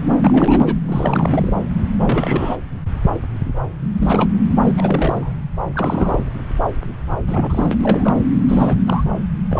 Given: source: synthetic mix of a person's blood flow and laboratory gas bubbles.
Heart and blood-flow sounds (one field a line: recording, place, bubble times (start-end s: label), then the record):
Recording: Doppler ultrasound of blood flow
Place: subclavian vein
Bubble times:
0.18-0.78 s: bubbles
0.85-1.54 s: bubbles
1.98-2.56 s: bubbles
4.00-4.30 s: bubbles
4.63-4.71 s: bubbles
4.77-5.33 s: bubbles
5.75-6.19 s: bubbles
7.27-8.14 s: bubbles
8.48-8.76 s: bubbles
8.86-9.04 s: bubbles
9.50-9.59 s: bubbles
From the record:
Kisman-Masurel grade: 332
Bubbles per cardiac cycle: rolling drumbeat, 9 or more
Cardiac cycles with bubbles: 50 to 99%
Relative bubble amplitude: moderate (0.250 to 0.450)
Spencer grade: 3 (all of the cardiac periods contain showers or single bubble signals, but not dominating or overriding the cardiac motion signals)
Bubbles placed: anywhere in the cardiac cycle